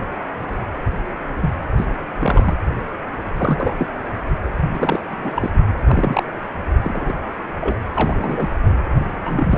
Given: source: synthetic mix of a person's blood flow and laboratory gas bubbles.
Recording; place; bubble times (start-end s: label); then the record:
Doppler ultrasound of blood flow; precordium
1.42-1.50 s: bubbles
1.77-1.85 s: bubbles
2.20-2.54 s: bubbles
3.37-3.74 s: bubbles
3.77-3.87 s: bubbles
4.74-5.02 s: bubbles
5.04-5.50 s: bubbles
5.86-6.24 s: bubbles
6.83-7.15 s: bubbles
7.60-7.77 s: bubbles
7.94-8.48 s: bubbles
9.25-9.58 s: bubbles
From the record:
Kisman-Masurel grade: 232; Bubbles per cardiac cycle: several, 3 to 8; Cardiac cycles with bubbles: 50 to 99%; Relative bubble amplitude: moderate (0.250 to 0.450); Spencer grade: 3 (all of the cardiac periods contain showers or single bubble signals, but not dominating or overriding the cardiac motion signals); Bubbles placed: anywhere in the cardiac cycle